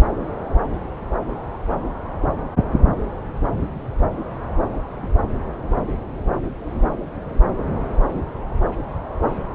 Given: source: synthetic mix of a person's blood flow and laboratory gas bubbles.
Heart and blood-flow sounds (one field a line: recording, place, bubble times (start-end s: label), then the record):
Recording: Doppler ultrasound of blood flow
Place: subclavian vein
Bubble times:
no bubbles
From the record:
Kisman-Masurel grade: 000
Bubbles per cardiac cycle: 0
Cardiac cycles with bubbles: 0%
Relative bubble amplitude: no bubbles discernible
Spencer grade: 0 (complete lack of bubble signals)